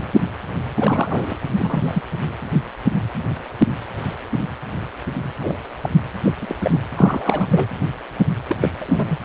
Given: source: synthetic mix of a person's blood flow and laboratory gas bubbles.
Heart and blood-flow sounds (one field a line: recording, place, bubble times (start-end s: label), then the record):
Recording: Doppler ultrasound of blood flow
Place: precordium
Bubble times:
0.00-0.02 s: bubbles
0.76-1.36 s: bubbles
1.58-2.02 s: bubbles
5.39-5.57 s: bubbles
5.82-5.90 s: bubbles
6.24-6.33 s: bubbles
6.41-6.55 s: bubbles
6.60-6.79 s: bubbles
6.96-7.48 s: bubbles
7.51-7.68 s: bubbles
8.48-8.57 s: bubbles
8.60-8.70 s: bubbles
8.79-9.17 s: bubbles
From the record:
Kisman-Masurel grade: 232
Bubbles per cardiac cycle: several, 3 to 8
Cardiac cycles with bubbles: 50 to 99%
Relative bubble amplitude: moderate (0.250 to 0.450)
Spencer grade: 3 (all of the cardiac periods contain showers or single bubble signals, but not dominating or overriding the cardiac motion signals)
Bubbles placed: anywhere in the cardiac cycle